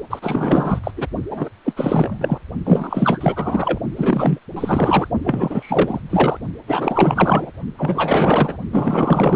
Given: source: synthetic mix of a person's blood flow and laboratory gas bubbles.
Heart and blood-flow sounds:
Doppler ultrasound of blood flow; precordium
0.10-0.79 s: bubbles
0.83-0.91 s: bubbles
0.96-1.07 s: bubbles
1.30-1.49 s: bubbles
1.64-1.73 s: bubbles
1.76-2.39 s: bubbles
2.65-3.79 s: bubbles
3.96-4.38 s: bubbles
4.55-5.08 s: bubbles
5.24-6.01 s: bubbles
6.09-6.39 s: bubbles
6.67-7.51 s: bubbles
7.77-8.57 s: bubbles
8.72-9.36 s: bubbles
From the record:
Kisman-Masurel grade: 444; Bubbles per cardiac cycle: continuous sound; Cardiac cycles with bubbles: 100%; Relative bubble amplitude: maximal (0.775 to 0.999); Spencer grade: 4 (maximum detectable bubble signal sounding continuously throughout systole and diastole of every cardiac period, and overriding the amplitude of the normal cardiac signals); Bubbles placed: only in the low amplitude regions of the cardiac cycle

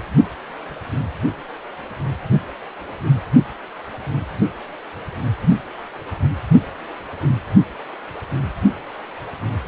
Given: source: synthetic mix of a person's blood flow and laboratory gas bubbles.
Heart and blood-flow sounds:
Doppler ultrasound of blood flow; precordium
no bubbles
From the record:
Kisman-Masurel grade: 000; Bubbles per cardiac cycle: 0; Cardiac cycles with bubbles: 0%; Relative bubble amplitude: no bubbles discernible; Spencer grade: 0 (complete lack of bubble signals)

